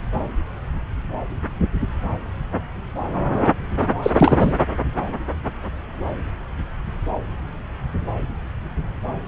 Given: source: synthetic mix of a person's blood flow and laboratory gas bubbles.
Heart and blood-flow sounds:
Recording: Doppler ultrasound of blood flow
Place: subclavian vein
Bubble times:
4.03-4.55 s: bubbles
From the record:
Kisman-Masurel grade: 213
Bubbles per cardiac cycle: several, 3 to 8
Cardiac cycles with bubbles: 1 to 10%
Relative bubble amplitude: loud (0.450 to 0.775)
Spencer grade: 1 (occasional bubble signal discernible with the cardiac motion signal, with majority of cardiac periods free of bubbles)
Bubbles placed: anywhere in the cardiac cycle

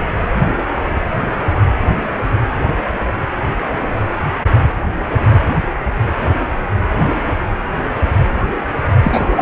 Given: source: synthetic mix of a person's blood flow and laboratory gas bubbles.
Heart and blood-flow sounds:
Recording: Doppler ultrasound of blood flow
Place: precordium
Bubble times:
9.03-9.42 s: bubbles
From the record:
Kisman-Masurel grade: 213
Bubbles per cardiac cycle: several, 3 to 8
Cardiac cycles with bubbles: 1 to 10%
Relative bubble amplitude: loud (0.450 to 0.775)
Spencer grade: 1 (occasional bubble signal discernible with the cardiac motion signal, with majority of cardiac periods free of bubbles)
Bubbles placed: anywhere in the cardiac cycle

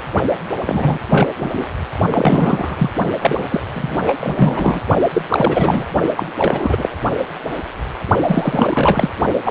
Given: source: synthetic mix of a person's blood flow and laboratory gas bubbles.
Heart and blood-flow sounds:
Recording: Doppler ultrasound of blood flow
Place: precordium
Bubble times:
0.66-0.98 s: bubbles
1.10-1.28 s: bubbles
1.39-1.67 s: bubbles
2.11-2.90 s: bubbles
3.21-3.44 s: bubbles
3.49-3.60 s: bubbles
3.74-3.96 s: bubbles
4.06-4.13 s: bubbles
4.20-4.80 s: bubbles
5.14-5.22 s: bubbles
5.29-5.84 s: bubbles
6.16-6.26 s: bubbles
6.37-6.89 s: bubbles
8.28-9.10 s: bubbles
9.45-9.51 s: bubbles
From the record:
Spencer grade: 3 (all of the cardiac periods contain showers or single bubble signals, but not dominating or overriding the cardiac motion signals)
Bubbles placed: only in the low amplitude regions of the cardiac cycle

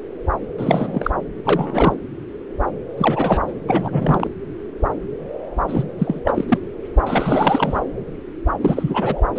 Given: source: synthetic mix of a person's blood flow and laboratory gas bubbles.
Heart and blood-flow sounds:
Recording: Doppler ultrasound of blood flow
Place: subclavian vein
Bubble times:
0.58-1.10 s: bubbles
1.45-1.96 s: bubbles
2.98-3.40 s: bubbles
3.48-3.53 s: bubbles
3.67-4.31 s: bubbles
5.68-5.83 s: bubbles
5.98-6.20 s: bubbles
6.25-6.45 s: bubbles
6.48-6.59 s: bubbles
7.07-7.80 s: bubbles
8.61-9.21 s: bubbles
9.35-9.39 s: bubbles
From the record:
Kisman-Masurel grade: 332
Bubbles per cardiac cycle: rolling drumbeat, 9 or more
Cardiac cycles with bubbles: 50 to 99%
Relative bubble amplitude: moderate (0.250 to 0.450)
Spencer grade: 3 (all of the cardiac periods contain showers or single bubble signals, but not dominating or overriding the cardiac motion signals)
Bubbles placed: anywhere in the cardiac cycle

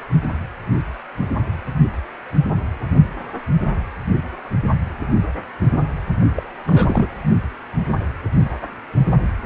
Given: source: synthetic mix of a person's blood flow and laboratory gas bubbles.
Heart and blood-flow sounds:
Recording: Doppler ultrasound of blood flow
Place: precordium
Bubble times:
6.36-6.43 s: bubbles
6.67-7.08 s: bubbles
From the record:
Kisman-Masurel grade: 212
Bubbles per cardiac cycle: several, 3 to 8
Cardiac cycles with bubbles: 1 to 10%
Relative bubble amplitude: moderate (0.250 to 0.450)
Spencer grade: 1 (occasional bubble signal discernible with the cardiac motion signal, with majority of cardiac periods free of bubbles)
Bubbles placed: anywhere in the cardiac cycle

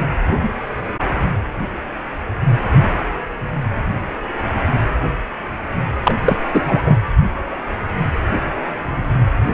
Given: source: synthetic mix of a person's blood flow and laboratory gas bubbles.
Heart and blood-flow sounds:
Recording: Doppler ultrasound of blood flow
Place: precordium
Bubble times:
6.04-6.13 s: bubbles
6.25-6.37 s: bubbles
6.53-6.83 s: bubbles
6.85-6.99 s: bubbles
From the record:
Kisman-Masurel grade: 223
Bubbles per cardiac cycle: several, 3 to 8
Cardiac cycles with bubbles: 10 to 50%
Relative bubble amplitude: loud (0.450 to 0.775)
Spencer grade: 2 (many but less than half of the cardiac periods contain bubble signals, singularly or in groups)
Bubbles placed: anywhere in the cardiac cycle

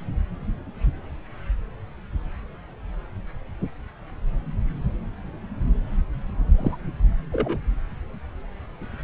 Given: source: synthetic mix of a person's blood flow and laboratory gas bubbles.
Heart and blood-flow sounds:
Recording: Doppler ultrasound of blood flow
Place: subclavian vein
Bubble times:
6.58-6.77 s: bubbles
7.31-7.59 s: bubbles
From the record:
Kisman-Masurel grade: 112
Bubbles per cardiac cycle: 1 to 2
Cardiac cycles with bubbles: 1 to 10%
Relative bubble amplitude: moderate (0.250 to 0.450)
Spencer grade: 1 (occasional bubble signal discernible with the cardiac motion signal, with majority of cardiac periods free of bubbles)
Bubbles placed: anywhere in the cardiac cycle

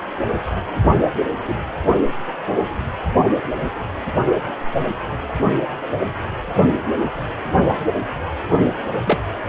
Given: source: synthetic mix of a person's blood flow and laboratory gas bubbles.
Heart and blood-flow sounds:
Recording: Doppler ultrasound of blood flow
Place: precordium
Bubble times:
1.47-1.54 s: bubbles
9.06-9.20 s: bubbles
From the record:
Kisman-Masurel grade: 123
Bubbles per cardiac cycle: 1 to 2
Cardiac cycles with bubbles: 10 to 50%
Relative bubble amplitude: loud (0.450 to 0.775)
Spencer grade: 2 (many but less than half of the cardiac periods contain bubble signals, singularly or in groups)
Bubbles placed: only in the low amplitude regions of the cardiac cycle

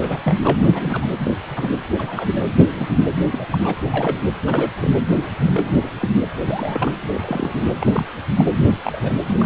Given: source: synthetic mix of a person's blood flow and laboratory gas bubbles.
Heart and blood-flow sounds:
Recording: Doppler ultrasound of blood flow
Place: precordium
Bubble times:
0.01-0.18 s: bubbles
0.23-0.54 s: bubbles
0.58-1.06 s: bubbles
1.24-1.33 s: bubbles
1.48-1.69 s: bubbles
1.98-2.48 s: bubbles
2.59-2.65 s: bubbles
2.71-2.86 s: bubbles
3.30-3.47 s: bubbles
3.51-3.58 s: bubbles
3.63-3.75 s: bubbles
3.78-4.19 s: bubbles
4.47-4.70 s: bubbles
4.82-4.89 s: bubbles
5.37-5.88 s: bubbles
6.00-6.08 s: bubbles
6.23-6.29 s: bubbles
6.49-6.91 s: bubbles
7.01-7.62 s: bubbles
7.81-8.08 s: bubbles
8.37-8.45 s: bubbles
8.55-8.74 s: bubbles
8.84-9.12 s: bubbles
9.26-9.46 s: bubbles
From the record:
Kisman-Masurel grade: 242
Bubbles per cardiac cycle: several, 3 to 8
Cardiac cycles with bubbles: 100%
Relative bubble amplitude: moderate (0.250 to 0.450)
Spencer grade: 3 (all of the cardiac periods contain showers or single bubble signals, but not dominating or overriding the cardiac motion signals)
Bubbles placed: anywhere in the cardiac cycle

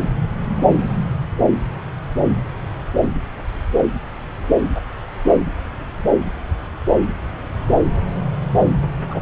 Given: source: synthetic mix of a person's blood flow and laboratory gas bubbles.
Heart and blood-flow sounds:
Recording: Doppler ultrasound of blood flow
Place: subclavian vein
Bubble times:
9.09-9.21 s: bubbles
From the record:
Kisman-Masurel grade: 122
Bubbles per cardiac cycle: 1 to 2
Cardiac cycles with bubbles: 10 to 50%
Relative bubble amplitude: moderate (0.250 to 0.450)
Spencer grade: 2 (many but less than half of the cardiac periods contain bubble signals, singularly or in groups)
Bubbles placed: anywhere in the cardiac cycle

